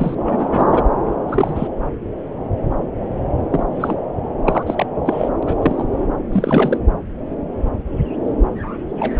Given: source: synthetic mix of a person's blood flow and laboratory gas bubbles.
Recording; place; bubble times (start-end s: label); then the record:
Doppler ultrasound of blood flow; subclavian vein
0.00-0.15 s: bubbles
0.25-0.83 s: bubbles
1.28-1.68 s: bubbles
3.50-3.63 s: bubbles
3.70-3.95 s: bubbles
4.46-4.63 s: bubbles
4.66-4.86 s: bubbles
5.05-5.29 s: bubbles
5.42-5.85 s: bubbles
6.31-6.77 s: bubbles
8.99-9.12 s: bubbles
From the record:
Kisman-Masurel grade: 232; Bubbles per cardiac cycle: several, 3 to 8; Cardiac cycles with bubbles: 50 to 99%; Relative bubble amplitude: moderate (0.250 to 0.450); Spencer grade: 3 (all of the cardiac periods contain showers or single bubble signals, but not dominating or overriding the cardiac motion signals); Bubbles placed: anywhere in the cardiac cycle